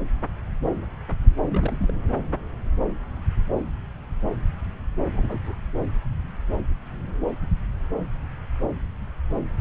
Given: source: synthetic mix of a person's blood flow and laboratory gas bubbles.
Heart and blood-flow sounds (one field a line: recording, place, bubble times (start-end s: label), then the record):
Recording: Doppler ultrasound of blood flow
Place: subclavian vein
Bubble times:
1.42-1.94 s: bubbles
5.12-5.40 s: bubbles
5.46-5.55 s: bubbles
From the record:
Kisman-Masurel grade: 211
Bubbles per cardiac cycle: several, 3 to 8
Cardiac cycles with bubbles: 1 to 10%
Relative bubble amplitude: barely perceptible (0.100 to 0.250)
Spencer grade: 1 (occasional bubble signal discernible with the cardiac motion signal, with majority of cardiac periods free of bubbles)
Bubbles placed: anywhere in the cardiac cycle